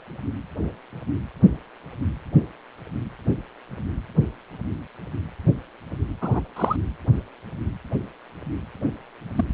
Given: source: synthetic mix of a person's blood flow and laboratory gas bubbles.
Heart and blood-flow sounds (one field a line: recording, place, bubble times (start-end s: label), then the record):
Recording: Doppler ultrasound of blood flow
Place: precordium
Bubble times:
6.21-6.40 s: bubbles
6.56-6.76 s: bubbles
9.36-9.44 s: bubbles
From the record:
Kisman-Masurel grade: 122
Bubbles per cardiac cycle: 1 to 2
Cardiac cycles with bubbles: 10 to 50%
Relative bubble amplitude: moderate (0.250 to 0.450)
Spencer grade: 2 (many but less than half of the cardiac periods contain bubble signals, singularly or in groups)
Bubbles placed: anywhere in the cardiac cycle